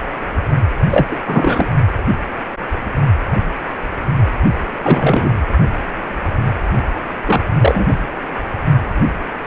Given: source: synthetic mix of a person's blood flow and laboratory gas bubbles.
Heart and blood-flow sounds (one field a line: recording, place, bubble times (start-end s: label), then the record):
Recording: Doppler ultrasound of blood flow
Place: precordium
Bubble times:
0.90-1.06 s: bubbles
1.10-1.16 s: bubbles
1.27-1.72 s: bubbles
4.77-5.33 s: bubbles
7.26-7.41 s: bubbles
7.59-7.96 s: bubbles
From the record:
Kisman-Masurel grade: 223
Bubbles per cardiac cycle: several, 3 to 8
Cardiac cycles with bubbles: 10 to 50%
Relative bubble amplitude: loud (0.450 to 0.775)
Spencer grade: 2 (many but less than half of the cardiac periods contain bubble signals, singularly or in groups)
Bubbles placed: only in the low amplitude regions of the cardiac cycle